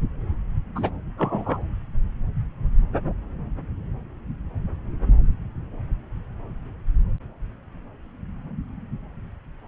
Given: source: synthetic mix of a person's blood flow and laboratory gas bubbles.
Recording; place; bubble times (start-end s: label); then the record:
Doppler ultrasound of blood flow; subclavian vein
0.76-0.90 s: bubbles
1.18-1.61 s: bubbles
From the record:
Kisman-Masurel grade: 112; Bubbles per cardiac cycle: 1 to 2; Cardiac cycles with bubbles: 1 to 10%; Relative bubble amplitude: moderate (0.250 to 0.450); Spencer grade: 1 (occasional bubble signal discernible with the cardiac motion signal, with majority of cardiac periods free of bubbles); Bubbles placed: anywhere in the cardiac cycle